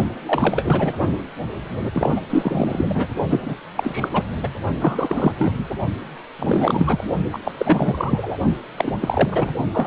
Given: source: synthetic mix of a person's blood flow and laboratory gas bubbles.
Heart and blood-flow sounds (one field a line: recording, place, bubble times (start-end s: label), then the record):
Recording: Doppler ultrasound of blood flow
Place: precordium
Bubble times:
0.27-0.93 s: bubbles
1.00-1.18 s: bubbles
1.93-2.21 s: bubbles
2.29-3.07 s: bubbles
3.29-3.55 s: bubbles
3.75-4.10 s: bubbles
4.13-4.23 s: bubbles
4.42-4.49 s: bubbles
4.79-5.32 s: bubbles
5.38-5.54 s: bubbles
5.58-5.64 s: bubbles
6.39-7.04 s: bubbles
7.32-7.39 s: bubbles
7.44-7.52 s: bubbles
7.58-8.38 s: bubbles
8.78-8.91 s: bubbles
9.00-9.50 s: bubbles
9.73-9.87 s: bubbles
From the record:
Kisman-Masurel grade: 343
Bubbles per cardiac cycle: rolling drumbeat, 9 or more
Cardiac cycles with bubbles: 100%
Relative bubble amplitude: loud (0.450 to 0.775)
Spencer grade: 3 (all of the cardiac periods contain showers or single bubble signals, but not dominating or overriding the cardiac motion signals)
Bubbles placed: only in the low amplitude regions of the cardiac cycle